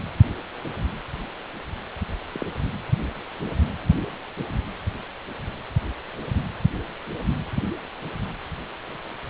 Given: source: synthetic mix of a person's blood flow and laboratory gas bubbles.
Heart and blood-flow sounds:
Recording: Doppler ultrasound of blood flow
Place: precordium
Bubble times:
2.33-2.46 s: bubbles
From the record:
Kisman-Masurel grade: 111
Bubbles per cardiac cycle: 1 to 2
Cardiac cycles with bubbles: 1 to 10%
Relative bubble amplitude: barely perceptible (0.100 to 0.250)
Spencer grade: 1 (occasional bubble signal discernible with the cardiac motion signal, with majority of cardiac periods free of bubbles)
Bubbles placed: anywhere in the cardiac cycle

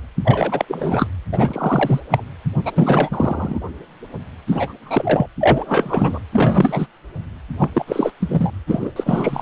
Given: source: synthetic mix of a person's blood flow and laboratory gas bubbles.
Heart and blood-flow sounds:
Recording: Doppler ultrasound of blood flow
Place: precordium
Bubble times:
0.25-0.65 s: bubbles
0.68-1.07 s: bubbles
1.32-2.00 s: bubbles
2.10-2.23 s: bubbles
2.65-2.72 s: bubbles
2.75-3.59 s: bubbles
4.47-4.73 s: bubbles
4.83-5.27 s: bubbles
5.41-6.19 s: bubbles
6.32-6.87 s: bubbles
7.58-7.70 s: bubbles
7.73-7.84 s: bubbles
7.87-8.12 s: bubbles
8.20-8.51 s: bubbles
8.66-8.92 s: bubbles
8.96-9.42 s: bubbles
From the record:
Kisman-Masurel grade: 333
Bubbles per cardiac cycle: rolling drumbeat, 9 or more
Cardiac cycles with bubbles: 50 to 99%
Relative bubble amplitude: loud (0.450 to 0.775)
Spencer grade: 3 (all of the cardiac periods contain showers or single bubble signals, but not dominating or overriding the cardiac motion signals)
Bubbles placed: anywhere in the cardiac cycle

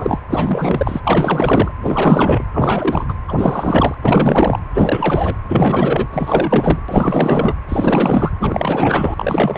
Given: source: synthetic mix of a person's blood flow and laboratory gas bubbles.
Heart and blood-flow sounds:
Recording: Doppler ultrasound of blood flow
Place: precordium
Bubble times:
0.00-0.20 s: bubbles
0.30-1.01 s: bubbles
1.04-1.72 s: bubbles
1.82-2.47 s: bubbles
2.53-3.05 s: bubbles
3.08-3.13 s: bubbles
3.28-3.94 s: bubbles
4.02-4.62 s: bubbles
4.74-5.36 s: bubbles
5.48-6.07 s: bubbles
6.12-6.79 s: bubbles
6.88-7.54 s: bubbles
7.69-8.31 s: bubbles
8.39-9.58 s: bubbles
From the record:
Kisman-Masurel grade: 444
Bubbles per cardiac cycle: continuous sound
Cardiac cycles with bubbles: 100%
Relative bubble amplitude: maximal (0.775 to 0.999)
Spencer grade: 4 (maximum detectable bubble signal sounding continuously throughout systole and diastole of every cardiac period, and overriding the amplitude of the normal cardiac signals)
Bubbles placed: anywhere in the cardiac cycle

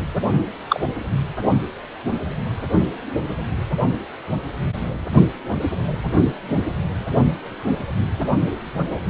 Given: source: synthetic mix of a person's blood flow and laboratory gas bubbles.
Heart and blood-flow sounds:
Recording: Doppler ultrasound of blood flow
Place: precordium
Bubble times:
0.69-0.80 s: bubbles
From the record:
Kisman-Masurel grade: 123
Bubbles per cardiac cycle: 1 to 2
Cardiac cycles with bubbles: 10 to 50%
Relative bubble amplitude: loud (0.450 to 0.775)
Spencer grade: 2 (many but less than half of the cardiac periods contain bubble signals, singularly or in groups)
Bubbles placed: only in the low amplitude regions of the cardiac cycle

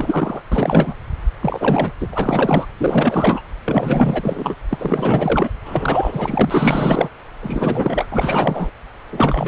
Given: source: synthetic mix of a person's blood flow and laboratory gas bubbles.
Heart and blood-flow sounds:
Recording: Doppler ultrasound of blood flow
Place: subclavian vein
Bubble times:
0.00-0.42 s: bubbles
0.52-0.94 s: bubbles
1.41-1.91 s: bubbles
2.00-2.09 s: bubbles
2.12-2.65 s: bubbles
2.78-3.41 s: bubbles
3.65-4.55 s: bubbles
4.70-5.50 s: bubbles
5.65-7.09 s: bubbles
7.42-8.06 s: bubbles
8.10-8.71 s: bubbles
9.10-9.48 s: bubbles
From the record:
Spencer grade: 4 (maximum detectable bubble signal sounding continuously throughout systole and diastole of every cardiac period, and overriding the amplitude of the normal cardiac signals)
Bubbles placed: anywhere in the cardiac cycle

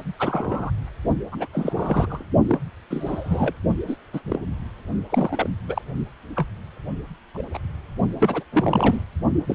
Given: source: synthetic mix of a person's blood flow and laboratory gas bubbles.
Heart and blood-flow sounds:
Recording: Doppler ultrasound of blood flow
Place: precordium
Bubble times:
0.19-0.70 s: bubbles
1.31-1.46 s: bubbles
1.53-2.24 s: bubbles
2.48-2.59 s: bubbles
2.90-3.54 s: bubbles
3.87-3.96 s: bubbles
4.13-4.21 s: bubbles
4.26-4.39 s: bubbles
5.09-5.49 s: bubbles
5.68-5.81 s: bubbles
6.36-6.46 s: bubbles
7.34-7.42 s: bubbles
7.54-7.58 s: bubbles
8.20-8.43 s: bubbles
8.53-9.03 s: bubbles
9.47-9.55 s: bubbles
From the record:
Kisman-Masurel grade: 242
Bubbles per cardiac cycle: several, 3 to 8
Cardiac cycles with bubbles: 100%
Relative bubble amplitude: moderate (0.250 to 0.450)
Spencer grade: 3 (all of the cardiac periods contain showers or single bubble signals, but not dominating or overriding the cardiac motion signals)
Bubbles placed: only in the low amplitude regions of the cardiac cycle

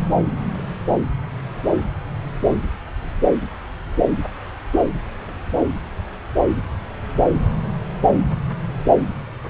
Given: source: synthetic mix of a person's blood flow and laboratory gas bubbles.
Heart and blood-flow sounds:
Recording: Doppler ultrasound of blood flow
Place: subclavian vein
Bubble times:
no bubbles
From the record:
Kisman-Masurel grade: 000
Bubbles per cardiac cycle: 0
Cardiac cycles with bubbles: 0%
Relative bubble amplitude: no bubbles discernible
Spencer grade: 0 (complete lack of bubble signals)

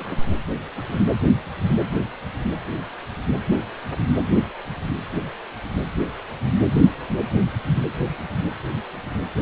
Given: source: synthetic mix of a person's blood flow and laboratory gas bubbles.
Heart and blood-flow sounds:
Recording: Doppler ultrasound of blood flow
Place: precordium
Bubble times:
0.00-0.16 s: bubbles
0.53-0.56 s: bubbles
0.74-0.83 s: bubbles
From the record:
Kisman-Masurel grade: 111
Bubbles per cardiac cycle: 1 to 2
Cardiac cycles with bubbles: 1 to 10%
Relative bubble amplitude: barely perceptible (0.100 to 0.250)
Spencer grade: 1 (occasional bubble signal discernible with the cardiac motion signal, with majority of cardiac periods free of bubbles)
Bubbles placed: anywhere in the cardiac cycle

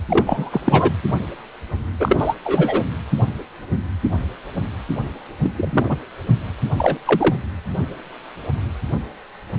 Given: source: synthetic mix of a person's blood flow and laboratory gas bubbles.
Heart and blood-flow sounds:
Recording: Doppler ultrasound of blood flow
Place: precordium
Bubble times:
0.10-0.61 s: bubbles
0.64-0.92 s: bubbles
2.00-2.35 s: bubbles
2.44-2.84 s: bubbles
5.43-5.51 s: bubbles
5.56-5.97 s: bubbles
6.77-6.99 s: bubbles
7.05-7.36 s: bubbles
From the record:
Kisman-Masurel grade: 223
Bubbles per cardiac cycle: several, 3 to 8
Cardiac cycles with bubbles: 10 to 50%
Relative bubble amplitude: loud (0.450 to 0.775)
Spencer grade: 2 (many but less than half of the cardiac periods contain bubble signals, singularly or in groups)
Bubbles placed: anywhere in the cardiac cycle

